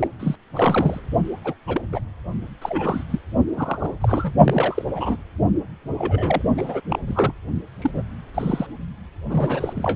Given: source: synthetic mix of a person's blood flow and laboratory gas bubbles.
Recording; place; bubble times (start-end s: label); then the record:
Doppler ultrasound of blood flow; precordium
0.01-0.07 s: bubbles
0.20-0.35 s: bubbles
0.54-1.00 s: bubbles
1.44-1.54 s: bubbles
1.67-1.81 s: bubbles
1.93-2.00 s: bubbles
2.61-3.04 s: bubbles
3.10-3.19 s: bubbles
3.56-3.96 s: bubbles
4.01-4.32 s: bubbles
4.44-4.83 s: bubbles
4.94-5.17 s: bubbles
5.98-6.42 s: bubbles
6.57-6.81 s: bubbles
6.89-6.99 s: bubbles
7.08-7.33 s: bubbles
7.82-8.03 s: bubbles
8.34-8.67 s: bubbles
9.29-9.96 s: bubbles
From the record:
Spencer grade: 3 (all of the cardiac periods contain showers or single bubble signals, but not dominating or overriding the cardiac motion signals); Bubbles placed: only in the low amplitude regions of the cardiac cycle